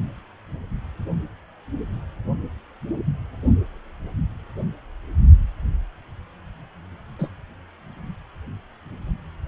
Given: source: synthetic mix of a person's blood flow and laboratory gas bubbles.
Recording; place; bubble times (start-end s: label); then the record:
Doppler ultrasound of blood flow; precordium
7.18-7.29 s: bubbles
From the record:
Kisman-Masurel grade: 111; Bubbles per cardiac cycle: 1 to 2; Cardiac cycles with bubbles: 1 to 10%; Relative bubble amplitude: barely perceptible (0.100 to 0.250); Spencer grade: 1 (occasional bubble signal discernible with the cardiac motion signal, with majority of cardiac periods free of bubbles); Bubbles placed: only in the low amplitude regions of the cardiac cycle